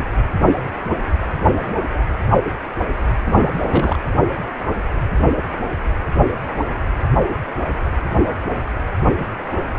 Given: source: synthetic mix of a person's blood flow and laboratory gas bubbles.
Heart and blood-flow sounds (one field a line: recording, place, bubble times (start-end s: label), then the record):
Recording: Doppler ultrasound of blood flow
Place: precordium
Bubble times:
3.26-3.35 s: bubbles
3.39-3.98 s: bubbles
From the record:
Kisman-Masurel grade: 212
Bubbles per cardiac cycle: several, 3 to 8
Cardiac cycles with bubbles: 1 to 10%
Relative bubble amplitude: moderate (0.250 to 0.450)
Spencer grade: 1 (occasional bubble signal discernible with the cardiac motion signal, with majority of cardiac periods free of bubbles)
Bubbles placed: anywhere in the cardiac cycle